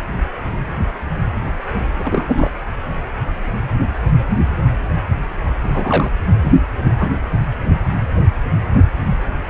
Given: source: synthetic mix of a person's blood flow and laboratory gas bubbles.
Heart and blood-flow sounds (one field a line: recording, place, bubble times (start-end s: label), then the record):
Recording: Doppler ultrasound of blood flow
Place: precordium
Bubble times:
1.95-2.50 s: bubbles
5.62-6.10 s: bubbles
6.42-6.51 s: bubbles
6.85-6.92 s: bubbles
7.00-7.10 s: bubbles
From the record:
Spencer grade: 2 (many but less than half of the cardiac periods contain bubble signals, singularly or in groups)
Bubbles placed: anywhere in the cardiac cycle